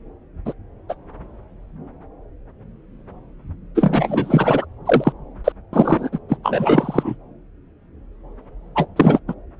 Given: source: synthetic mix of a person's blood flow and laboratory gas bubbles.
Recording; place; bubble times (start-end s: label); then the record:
Doppler ultrasound of blood flow; subclavian vein
0.46-0.53 s: bubbles
0.89-0.95 s: bubbles
3.75-4.66 s: bubbles
4.85-5.12 s: bubbles
5.44-5.52 s: bubbles
5.73-6.09 s: bubbles
6.12-6.19 s: bubbles
6.29-6.37 s: bubbles
6.43-7.16 s: bubbles
8.75-8.86 s: bubbles
8.96-9.20 s: bubbles
9.28-9.34 s: bubbles
From the record:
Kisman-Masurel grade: 233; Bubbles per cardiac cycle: several, 3 to 8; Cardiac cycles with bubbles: 50 to 99%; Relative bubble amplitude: loud (0.450 to 0.775); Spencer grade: 3 (all of the cardiac periods contain showers or single bubble signals, but not dominating or overriding the cardiac motion signals); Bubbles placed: anywhere in the cardiac cycle